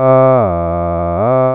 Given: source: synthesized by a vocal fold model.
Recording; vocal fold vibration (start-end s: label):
sustained vowel that changes in the middle
0.00-0.33 s: 130.0 Hz, open quotient 0.53
0.53-1.13 s: 85.7 Hz, open quotient 0.49
1.33-1.55 s: 130.0 Hz, open quotient 0.53